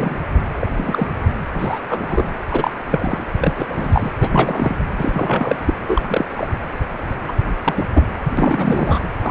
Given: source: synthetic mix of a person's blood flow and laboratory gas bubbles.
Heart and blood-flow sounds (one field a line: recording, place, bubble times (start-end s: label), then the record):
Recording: Doppler ultrasound of blood flow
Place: precordium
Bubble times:
0.00-0.18 s: bubbles
0.60-0.67 s: bubbles
0.76-1.10 s: bubbles
1.53-1.80 s: bubbles
1.90-2.33 s: bubbles
2.51-2.70 s: bubbles
2.91-3.25 s: bubbles
3.39-3.54 s: bubbles
3.57-3.66 s: bubbles
3.68-4.11 s: bubbles
4.20-4.76 s: bubbles
4.98-5.56 s: bubbles
5.65-5.74 s: bubbles
5.87-6.25 s: bubbles
6.37-6.49 s: bubbles
7.28-7.33 s: bubbles
7.64-7.87 s: bubbles
7.94-8.03 s: bubbles
8.37-9.00 s: bubbles
9.21-9.30 s: bubbles
From the record:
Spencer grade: 3 (all of the cardiac periods contain showers or single bubble signals, but not dominating or overriding the cardiac motion signals)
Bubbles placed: anywhere in the cardiac cycle